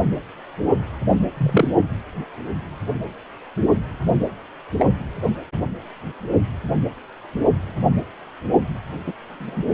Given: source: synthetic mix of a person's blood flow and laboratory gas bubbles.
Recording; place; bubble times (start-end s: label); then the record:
Doppler ultrasound of blood flow; precordium
1.37-1.70 s: bubbles
4.79-4.86 s: bubbles
9.06-9.12 s: bubbles
9.33-9.65 s: bubbles
From the record:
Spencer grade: 2 (many but less than half of the cardiac periods contain bubble signals, singularly or in groups); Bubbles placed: anywhere in the cardiac cycle